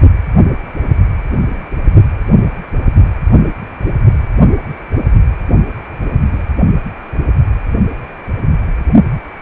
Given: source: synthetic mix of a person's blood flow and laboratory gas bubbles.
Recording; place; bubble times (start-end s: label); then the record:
Doppler ultrasound of blood flow; precordium
5.98-6.13 s: bubbles
6.24-6.45 s: bubbles
From the record:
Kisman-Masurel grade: 111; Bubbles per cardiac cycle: 1 to 2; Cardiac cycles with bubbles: 1 to 10%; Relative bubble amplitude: barely perceptible (0.100 to 0.250); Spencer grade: 1 (occasional bubble signal discernible with the cardiac motion signal, with majority of cardiac periods free of bubbles); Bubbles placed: only in the low amplitude regions of the cardiac cycle